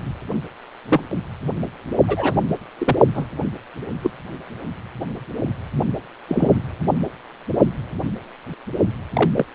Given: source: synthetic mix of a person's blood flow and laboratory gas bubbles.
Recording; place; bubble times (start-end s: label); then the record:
Doppler ultrasound of blood flow; precordium
0.89-1.00 s: bubbles
2.07-2.33 s: bubbles
2.78-2.96 s: bubbles
3.14-3.26 s: bubbles
4.02-4.10 s: bubbles
6.29-6.50 s: bubbles
9.13-9.30 s: bubbles
9.36-9.45 s: bubbles
From the record:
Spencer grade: 2 (many but less than half of the cardiac periods contain bubble signals, singularly or in groups); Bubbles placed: only in the low amplitude regions of the cardiac cycle